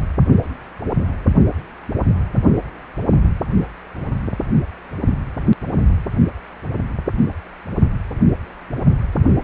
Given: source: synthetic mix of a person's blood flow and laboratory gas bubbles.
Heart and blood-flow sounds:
Doppler ultrasound of blood flow; precordium
no bubbles
From the record:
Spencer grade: 0 (complete lack of bubble signals)

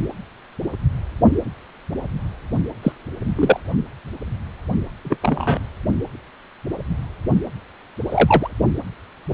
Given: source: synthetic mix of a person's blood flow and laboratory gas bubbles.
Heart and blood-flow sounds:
Doppler ultrasound of blood flow; precordium
2.83-2.92 s: bubbles
3.35-3.60 s: bubbles
5.04-5.17 s: bubbles
5.22-5.59 s: bubbles
8.08-8.48 s: bubbles
From the record:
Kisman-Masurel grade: 123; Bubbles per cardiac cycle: 1 to 2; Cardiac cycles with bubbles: 10 to 50%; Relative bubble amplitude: loud (0.450 to 0.775); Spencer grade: 2 (many but less than half of the cardiac periods contain bubble signals, singularly or in groups); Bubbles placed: only in the low amplitude regions of the cardiac cycle

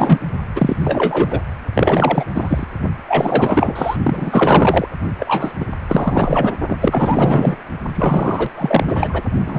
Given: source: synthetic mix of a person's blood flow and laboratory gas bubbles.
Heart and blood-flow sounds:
Doppler ultrasound of blood flow; precordium
0.00-0.20 s: bubbles
0.55-1.40 s: bubbles
1.75-2.25 s: bubbles
2.34-2.67 s: bubbles
3.08-3.97 s: bubbles
4.04-4.88 s: bubbles
5.19-5.53 s: bubbles
5.59-5.65 s: bubbles
5.88-6.56 s: bubbles
6.68-6.76 s: bubbles
6.80-7.55 s: bubbles
7.95-8.50 s: bubbles
8.58-9.24 s: bubbles
9.45-9.59 s: bubbles
From the record:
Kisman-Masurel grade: 444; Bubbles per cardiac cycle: continuous sound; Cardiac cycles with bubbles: 100%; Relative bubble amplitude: maximal (0.775 to 0.999); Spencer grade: 4 (maximum detectable bubble signal sounding continuously throughout systole and diastole of every cardiac period, and overriding the amplitude of the normal cardiac signals); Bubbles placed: only in the low amplitude regions of the cardiac cycle

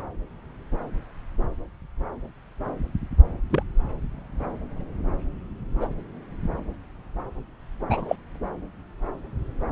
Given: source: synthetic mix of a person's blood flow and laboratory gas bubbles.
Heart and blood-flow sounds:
Doppler ultrasound of blood flow; subclavian vein
3.50-3.63 s: bubbles
5.80-5.88 s: bubbles
7.89-8.16 s: bubbles
From the record:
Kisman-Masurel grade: 122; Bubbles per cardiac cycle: 1 to 2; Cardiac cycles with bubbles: 10 to 50%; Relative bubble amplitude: moderate (0.250 to 0.450); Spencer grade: 2 (many but less than half of the cardiac periods contain bubble signals, singularly or in groups); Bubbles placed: anywhere in the cardiac cycle

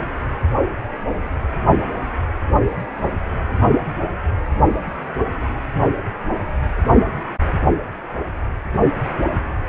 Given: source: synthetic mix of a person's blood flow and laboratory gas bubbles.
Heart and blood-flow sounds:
Doppler ultrasound of blood flow; precordium
no bubbles
From the record:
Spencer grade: 0 (complete lack of bubble signals)

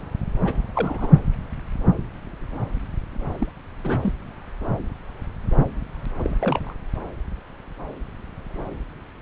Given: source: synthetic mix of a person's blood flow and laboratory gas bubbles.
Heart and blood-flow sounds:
Doppler ultrasound of blood flow; subclavian vein
0.44-0.60 s: bubbles
0.75-1.08 s: bubbles
3.23-3.52 s: bubbles
3.84-4.12 s: bubbles
6.18-6.36 s: bubbles
6.40-6.74 s: bubbles
From the record:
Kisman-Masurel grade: 221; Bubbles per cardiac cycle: several, 3 to 8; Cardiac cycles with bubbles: 10 to 50%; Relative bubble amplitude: barely perceptible (0.100 to 0.250); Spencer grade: 2 (many but less than half of the cardiac periods contain bubble signals, singularly or in groups); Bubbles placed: anywhere in the cardiac cycle

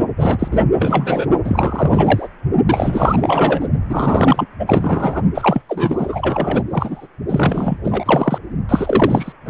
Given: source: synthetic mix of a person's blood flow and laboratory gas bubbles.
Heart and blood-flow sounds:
Doppler ultrasound of blood flow; precordium
0.16-0.48 s: bubbles
0.51-0.61 s: bubbles
0.75-1.27 s: bubbles
1.44-2.28 s: bubbles
2.65-3.69 s: bubbles
3.89-4.46 s: bubbles
4.58-5.22 s: bubbles
5.34-5.61 s: bubbles
5.68-6.63 s: bubbles
6.71-7.07 s: bubbles
7.29-7.78 s: bubbles
7.83-8.38 s: bubbles
8.69-9.32 s: bubbles
9.45-9.50 s: bubbles
From the record:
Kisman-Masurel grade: 444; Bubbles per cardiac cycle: continuous sound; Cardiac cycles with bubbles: 100%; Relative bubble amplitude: maximal (0.775 to 0.999); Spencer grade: 4 (maximum detectable bubble signal sounding continuously throughout systole and diastole of every cardiac period, and overriding the amplitude of the normal cardiac signals); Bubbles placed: only in the low amplitude regions of the cardiac cycle

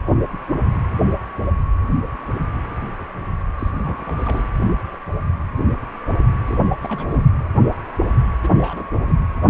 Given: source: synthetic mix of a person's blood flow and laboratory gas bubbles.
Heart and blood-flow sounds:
Doppler ultrasound of blood flow; precordium
3.58-3.71 s: bubbles
3.78-4.15 s: bubbles
4.17-4.48 s: bubbles
6.46-6.58 s: bubbles
6.67-6.72 s: bubbles
6.81-7.29 s: bubbles
8.42-8.95 s: bubbles
9.06-9.13 s: bubbles
From the record:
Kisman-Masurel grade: 221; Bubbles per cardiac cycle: several, 3 to 8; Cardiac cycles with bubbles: 10 to 50%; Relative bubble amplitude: barely perceptible (0.100 to 0.250); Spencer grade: 2 (many but less than half of the cardiac periods contain bubble signals, singularly or in groups); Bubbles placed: anywhere in the cardiac cycle

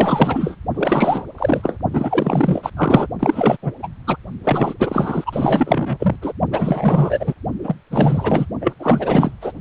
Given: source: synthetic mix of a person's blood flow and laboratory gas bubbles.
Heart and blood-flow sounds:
Doppler ultrasound of blood flow; precordium
0.00-0.56 s: bubbles
0.74-1.25 s: bubbles
1.38-1.77 s: bubbles
1.93-2.70 s: bubbles
2.76-3.07 s: bubbles
3.19-3.57 s: bubbles
3.62-3.73 s: bubbles
3.82-3.88 s: bubbles
4.07-4.16 s: bubbles
4.44-4.74 s: bubbles
4.79-6.16 s: bubbles
6.21-6.32 s: bubbles
6.51-7.34 s: bubbles
7.63-7.75 s: bubbles
7.91-8.46 s: bubbles
8.61-8.73 s: bubbles
8.79-9.31 s: bubbles
9.41-9.52 s: bubbles
From the record:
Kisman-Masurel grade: 444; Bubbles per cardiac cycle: continuous sound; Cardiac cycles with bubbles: 100%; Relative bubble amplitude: maximal (0.775 to 0.999); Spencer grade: 4 (maximum detectable bubble signal sounding continuously throughout systole and diastole of every cardiac period, and overriding the amplitude of the normal cardiac signals); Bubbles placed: only in the low amplitude regions of the cardiac cycle

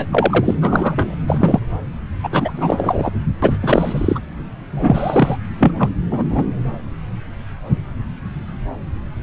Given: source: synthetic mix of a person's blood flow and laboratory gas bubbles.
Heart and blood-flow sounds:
Doppler ultrasound of blood flow; subclavian vein
0.00-0.07 s: bubbles
0.12-0.55 s: bubbles
0.61-1.15 s: bubbles
1.27-1.60 s: bubbles
2.23-2.52 s: bubbles
2.56-3.10 s: bubbles
3.42-3.57 s: bubbles
3.62-4.20 s: bubbles
4.72-5.37 s: bubbles
5.60-5.74 s: bubbles
5.79-5.90 s: bubbles
6.11-6.23 s: bubbles
6.29-6.45 s: bubbles
From the record:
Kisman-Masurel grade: 333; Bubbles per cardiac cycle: rolling drumbeat, 9 or more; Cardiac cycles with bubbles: 50 to 99%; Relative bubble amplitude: loud (0.450 to 0.775); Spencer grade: 3 (all of the cardiac periods contain showers or single bubble signals, but not dominating or overriding the cardiac motion signals); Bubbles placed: anywhere in the cardiac cycle

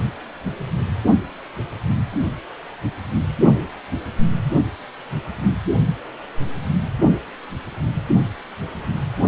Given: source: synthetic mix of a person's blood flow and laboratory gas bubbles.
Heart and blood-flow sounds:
Doppler ultrasound of blood flow; precordium
no bubbles
From the record:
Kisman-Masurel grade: 000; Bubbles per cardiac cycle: 0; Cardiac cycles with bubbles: 0%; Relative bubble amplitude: no bubbles discernible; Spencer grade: 0 (complete lack of bubble signals)

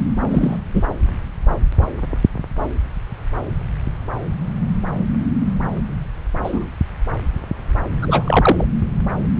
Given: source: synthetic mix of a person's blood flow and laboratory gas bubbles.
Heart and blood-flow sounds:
Doppler ultrasound of blood flow; subclavian vein
0.28-0.56 s: bubbles
0.74-0.83 s: bubbles
6.43-6.65 s: bubbles
8.02-8.65 s: bubbles
From the record:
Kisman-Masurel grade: 123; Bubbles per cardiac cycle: 1 to 2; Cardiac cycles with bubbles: 10 to 50%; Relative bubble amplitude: loud (0.450 to 0.775); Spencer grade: 2 (many but less than half of the cardiac periods contain bubble signals, singularly or in groups); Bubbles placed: anywhere in the cardiac cycle

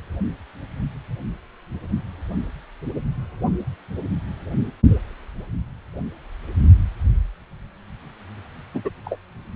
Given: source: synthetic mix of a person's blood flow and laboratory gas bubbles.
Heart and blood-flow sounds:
Doppler ultrasound of blood flow; precordium
8.74-8.89 s: bubbles
9.04-9.18 s: bubbles
From the record:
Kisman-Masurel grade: 212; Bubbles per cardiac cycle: several, 3 to 8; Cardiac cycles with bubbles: 1 to 10%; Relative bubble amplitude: moderate (0.250 to 0.450); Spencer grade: 1 (occasional bubble signal discernible with the cardiac motion signal, with majority of cardiac periods free of bubbles); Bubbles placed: anywhere in the cardiac cycle

